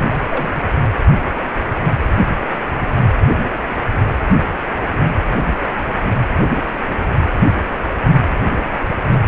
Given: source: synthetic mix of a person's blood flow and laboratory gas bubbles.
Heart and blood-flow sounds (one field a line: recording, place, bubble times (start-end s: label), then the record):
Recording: Doppler ultrasound of blood flow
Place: precordium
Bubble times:
0.00-0.24 s: bubbles
0.31-0.49 s: bubbles
From the record:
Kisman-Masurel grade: 211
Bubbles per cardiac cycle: several, 3 to 8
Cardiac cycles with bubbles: 1 to 10%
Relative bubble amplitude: barely perceptible (0.100 to 0.250)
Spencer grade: 1 (occasional bubble signal discernible with the cardiac motion signal, with majority of cardiac periods free of bubbles)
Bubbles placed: anywhere in the cardiac cycle